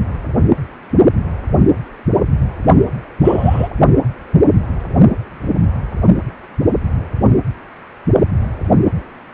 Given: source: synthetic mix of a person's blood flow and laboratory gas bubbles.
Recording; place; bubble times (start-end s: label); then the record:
Doppler ultrasound of blood flow; precordium
3.23-3.69 s: bubbles
From the record:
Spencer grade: 2 (many but less than half of the cardiac periods contain bubble signals, singularly or in groups); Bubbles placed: only in the low amplitude regions of the cardiac cycle